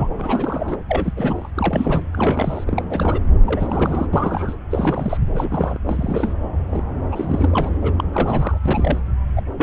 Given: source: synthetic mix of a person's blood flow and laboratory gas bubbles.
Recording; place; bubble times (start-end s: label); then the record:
Doppler ultrasound of blood flow; subclavian vein
0.00-0.09 s: bubbles
0.18-0.77 s: bubbles
0.89-1.13 s: bubbles
1.17-1.49 s: bubbles
1.54-2.02 s: bubbles
2.13-2.64 s: bubbles
2.67-2.83 s: bubbles
2.89-3.20 s: bubbles
3.45-4.07 s: bubbles
4.13-4.57 s: bubbles
4.71-5.17 s: bubbles
5.30-5.79 s: bubbles
5.89-6.34 s: bubbles
6.70-6.84 s: bubbles
7.12-7.70 s: bubbles
7.82-7.94 s: bubbles
7.98-8.04 s: bubbles
8.12-8.58 s: bubbles
8.66-9.01 s: bubbles
9.37-9.42 s: bubbles
9.58-9.63 s: bubbles
From the record:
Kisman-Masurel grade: 342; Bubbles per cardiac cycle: rolling drumbeat, 9 or more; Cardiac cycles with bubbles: 100%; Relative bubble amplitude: moderate (0.250 to 0.450); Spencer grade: 3 (all of the cardiac periods contain showers or single bubble signals, but not dominating or overriding the cardiac motion signals); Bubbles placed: anywhere in the cardiac cycle